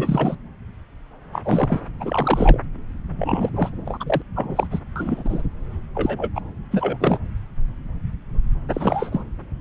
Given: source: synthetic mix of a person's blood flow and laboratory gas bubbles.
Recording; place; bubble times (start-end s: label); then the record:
Doppler ultrasound of blood flow; subclavian vein
0.00-0.35 s: bubbles
1.33-1.81 s: bubbles
2.00-2.59 s: bubbles
3.16-3.49 s: bubbles
3.54-3.69 s: bubbles
3.85-3.98 s: bubbles
4.00-4.22 s: bubbles
4.36-4.67 s: bubbles
4.71-4.79 s: bubbles
4.96-5.43 s: bubbles
5.95-6.29 s: bubbles
6.35-6.41 s: bubbles
6.71-7.19 s: bubbles
8.73-9.23 s: bubbles
From the record:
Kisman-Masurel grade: 232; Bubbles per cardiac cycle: several, 3 to 8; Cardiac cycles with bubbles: 50 to 99%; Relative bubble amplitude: moderate (0.250 to 0.450); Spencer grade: 3 (all of the cardiac periods contain showers or single bubble signals, but not dominating or overriding the cardiac motion signals); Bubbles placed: anywhere in the cardiac cycle